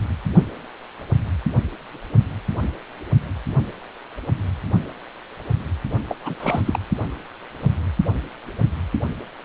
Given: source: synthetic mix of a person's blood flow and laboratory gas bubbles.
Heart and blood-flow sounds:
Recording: Doppler ultrasound of blood flow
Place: precordium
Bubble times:
6.08-6.16 s: bubbles
6.23-6.35 s: bubbles
6.40-6.79 s: bubbles
From the record:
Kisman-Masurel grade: 222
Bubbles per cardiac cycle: several, 3 to 8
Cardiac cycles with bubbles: 10 to 50%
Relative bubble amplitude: moderate (0.250 to 0.450)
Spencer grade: 2 (many but less than half of the cardiac periods contain bubble signals, singularly or in groups)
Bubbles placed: only in the low amplitude regions of the cardiac cycle

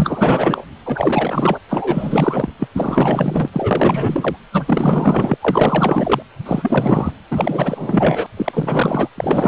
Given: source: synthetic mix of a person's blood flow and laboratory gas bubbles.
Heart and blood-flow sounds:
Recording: Doppler ultrasound of blood flow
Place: precordium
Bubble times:
0.00-0.71 s: bubbles
0.85-1.59 s: bubbles
1.69-2.52 s: bubbles
2.59-2.67 s: bubbles
2.73-3.50 s: bubbles
3.52-4.37 s: bubbles
4.52-5.37 s: bubbles
5.41-6.22 s: bubbles
6.46-7.13 s: bubbles
7.30-8.27 s: bubbles
8.37-9.09 s: bubbles
9.18-9.48 s: bubbles
From the record:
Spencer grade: 4 (maximum detectable bubble signal sounding continuously throughout systole and diastole of every cardiac period, and overriding the amplitude of the normal cardiac signals)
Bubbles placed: anywhere in the cardiac cycle

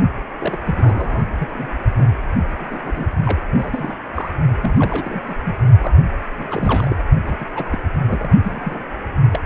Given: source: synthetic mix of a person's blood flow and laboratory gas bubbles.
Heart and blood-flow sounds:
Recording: Doppler ultrasound of blood flow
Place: precordium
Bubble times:
0.39-0.57 s: bubbles
0.65-1.25 s: bubbles
1.40-1.48 s: bubbles
1.52-1.67 s: bubbles
1.97-2.12 s: bubbles
2.60-3.08 s: bubbles
3.25-3.43 s: bubbles
3.54-3.94 s: bubbles
4.14-4.30 s: bubbles
4.62-5.35 s: bubbles
5.44-5.55 s: bubbles
5.80-5.95 s: bubbles
6.37-6.47 s: bubbles
6.50-6.96 s: bubbles
7.26-7.38 s: bubbles
7.40-7.46 s: bubbles
7.54-7.79 s: bubbles
8.07-8.30 s: bubbles
8.44-8.84 s: bubbles
9.32-9.39 s: bubbles
From the record:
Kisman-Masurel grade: 242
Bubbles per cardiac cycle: several, 3 to 8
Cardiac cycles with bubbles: 100%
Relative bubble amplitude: moderate (0.250 to 0.450)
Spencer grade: 3 (all of the cardiac periods contain showers or single bubble signals, but not dominating or overriding the cardiac motion signals)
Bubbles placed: only in the low amplitude regions of the cardiac cycle

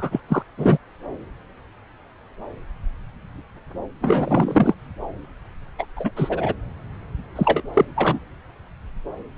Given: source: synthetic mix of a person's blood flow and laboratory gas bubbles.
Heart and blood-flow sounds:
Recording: Doppler ultrasound of blood flow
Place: subclavian vein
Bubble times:
0.00-0.21 s: bubbles
0.28-0.42 s: bubbles
0.57-0.78 s: bubbles
4.01-4.75 s: bubbles
5.79-5.85 s: bubbles
5.96-6.11 s: bubbles
6.16-6.53 s: bubbles
7.35-7.61 s: bubbles
7.74-7.85 s: bubbles
7.95-8.20 s: bubbles
From the record:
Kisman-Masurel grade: 233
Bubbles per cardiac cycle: several, 3 to 8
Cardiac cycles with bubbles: 50 to 99%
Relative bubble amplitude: loud (0.450 to 0.775)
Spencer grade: 3 (all of the cardiac periods contain showers or single bubble signals, but not dominating or overriding the cardiac motion signals)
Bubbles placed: anywhere in the cardiac cycle

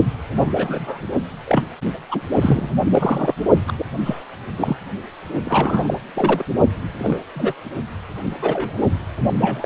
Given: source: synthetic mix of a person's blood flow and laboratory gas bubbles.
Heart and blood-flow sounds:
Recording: Doppler ultrasound of blood flow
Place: precordium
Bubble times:
0.36-1.01 s: bubbles
1.46-1.63 s: bubbles
2.09-2.21 s: bubbles
2.41-2.70 s: bubbles
2.92-3.34 s: bubbles
3.67-3.73 s: bubbles
3.78-3.85 s: bubbles
4.05-4.23 s: bubbles
4.58-4.77 s: bubbles
5.45-5.94 s: bubbles
6.15-6.43 s: bubbles
6.99-7.19 s: bubbles
7.34-7.53 s: bubbles
8.41-8.79 s: bubbles
9.41-9.66 s: bubbles
From the record:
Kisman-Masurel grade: 242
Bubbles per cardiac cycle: several, 3 to 8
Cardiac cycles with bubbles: 100%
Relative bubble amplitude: moderate (0.250 to 0.450)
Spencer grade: 3 (all of the cardiac periods contain showers or single bubble signals, but not dominating or overriding the cardiac motion signals)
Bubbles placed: only in the low amplitude regions of the cardiac cycle

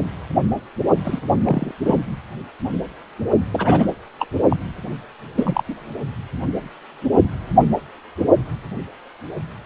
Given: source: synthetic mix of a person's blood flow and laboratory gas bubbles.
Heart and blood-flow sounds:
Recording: Doppler ultrasound of blood flow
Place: precordium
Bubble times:
1.04-1.21 s: bubbles
1.44-1.71 s: bubbles
1.86-1.98 s: bubbles
3.51-3.88 s: bubbles
4.19-4.27 s: bubbles
4.50-4.57 s: bubbles
5.37-5.62 s: bubbles
5.69-5.75 s: bubbles
From the record:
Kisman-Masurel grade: 222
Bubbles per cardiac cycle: several, 3 to 8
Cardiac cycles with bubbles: 10 to 50%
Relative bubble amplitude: moderate (0.250 to 0.450)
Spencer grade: 2 (many but less than half of the cardiac periods contain bubble signals, singularly or in groups)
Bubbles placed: only in the low amplitude regions of the cardiac cycle

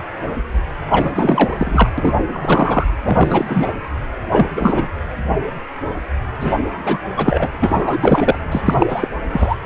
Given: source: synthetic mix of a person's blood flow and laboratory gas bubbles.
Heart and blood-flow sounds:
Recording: Doppler ultrasound of blood flow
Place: precordium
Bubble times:
0.91-1.90 s: bubbles
1.98-2.17 s: bubbles
2.28-2.84 s: bubbles
3.02-3.73 s: bubbles
4.30-4.46 s: bubbles
4.57-4.88 s: bubbles
6.40-6.55 s: bubbles
6.83-7.06 s: bubbles
7.16-7.48 s: bubbles
7.61-8.38 s: bubbles
8.51-8.62 s: bubbles
8.65-9.09 s: bubbles
9.33-9.56 s: bubbles
From the record:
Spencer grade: 3 (all of the cardiac periods contain showers or single bubble signals, but not dominating or overriding the cardiac motion signals)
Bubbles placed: anywhere in the cardiac cycle

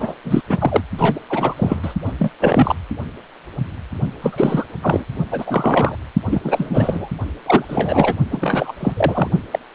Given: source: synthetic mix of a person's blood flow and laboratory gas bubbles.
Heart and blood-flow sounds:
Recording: Doppler ultrasound of blood flow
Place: precordium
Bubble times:
0.00-0.15 s: bubbles
0.24-0.41 s: bubbles
0.49-0.81 s: bubbles
0.97-1.19 s: bubbles
1.29-1.94 s: bubbles
2.04-2.12 s: bubbles
2.19-2.32 s: bubbles
2.40-2.75 s: bubbles
4.22-4.64 s: bubbles
4.82-5.04 s: bubbles
5.31-5.96 s: bubbles
6.25-6.41 s: bubbles
6.43-7.08 s: bubbles
7.46-7.64 s: bubbles
7.68-8.15 s: bubbles
8.31-8.73 s: bubbles
8.79-9.31 s: bubbles
9.51-9.59 s: bubbles
From the record:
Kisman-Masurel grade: 333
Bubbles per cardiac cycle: rolling drumbeat, 9 or more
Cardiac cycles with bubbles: 50 to 99%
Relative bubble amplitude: loud (0.450 to 0.775)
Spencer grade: 3 (all of the cardiac periods contain showers or single bubble signals, but not dominating or overriding the cardiac motion signals)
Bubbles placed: only in the low amplitude regions of the cardiac cycle

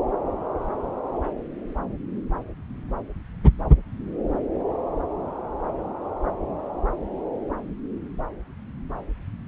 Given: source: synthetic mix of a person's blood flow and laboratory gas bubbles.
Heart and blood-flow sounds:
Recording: Doppler ultrasound of blood flow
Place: subclavian vein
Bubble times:
no bubbles
From the record:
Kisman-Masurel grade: 000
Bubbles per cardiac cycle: 0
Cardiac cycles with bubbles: 0%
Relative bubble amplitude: no bubbles discernible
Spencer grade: 0 (complete lack of bubble signals)

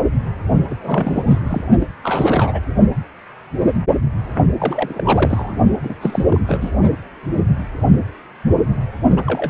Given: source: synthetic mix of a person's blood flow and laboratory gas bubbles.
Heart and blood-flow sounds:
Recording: Doppler ultrasound of blood flow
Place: precordium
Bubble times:
0.69-1.42 s: bubbles
1.50-1.64 s: bubbles
1.80-1.88 s: bubbles
2.03-2.61 s: bubbles
4.58-5.55 s: bubbles
5.83-5.96 s: bubbles
6.01-6.26 s: bubbles
6.30-6.41 s: bubbles
6.46-6.71 s: bubbles
9.16-9.50 s: bubbles
From the record:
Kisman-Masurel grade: 332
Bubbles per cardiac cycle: rolling drumbeat, 9 or more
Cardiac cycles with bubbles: 50 to 99%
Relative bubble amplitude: moderate (0.250 to 0.450)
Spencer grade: 3 (all of the cardiac periods contain showers or single bubble signals, but not dominating or overriding the cardiac motion signals)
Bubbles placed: only in the low amplitude regions of the cardiac cycle

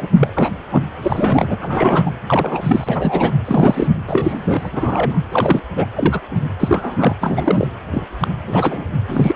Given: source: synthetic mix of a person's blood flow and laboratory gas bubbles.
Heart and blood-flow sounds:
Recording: Doppler ultrasound of blood flow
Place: precordium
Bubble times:
0.00-0.08 s: bubbles
0.14-0.31 s: bubbles
0.35-0.55 s: bubbles
0.72-0.83 s: bubbles
1.02-1.56 s: bubbles
1.62-2.11 s: bubbles
2.27-3.33 s: bubbles
3.45-3.88 s: bubbles
4.08-4.69 s: bubbles
4.72-5.18 s: bubbles
5.31-5.61 s: bubbles
5.76-5.87 s: bubbles
5.95-6.21 s: bubbles
6.31-6.40 s: bubbles
6.60-7.16 s: bubbles
7.21-7.67 s: bubbles
7.92-8.06 s: bubbles
8.21-8.28 s: bubbles
8.46-8.84 s: bubbles
9.08-9.35 s: bubbles
From the record:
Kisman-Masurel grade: 243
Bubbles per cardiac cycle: several, 3 to 8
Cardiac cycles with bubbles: 100%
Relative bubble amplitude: loud (0.450 to 0.775)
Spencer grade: 3 (all of the cardiac periods contain showers or single bubble signals, but not dominating or overriding the cardiac motion signals)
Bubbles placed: anywhere in the cardiac cycle

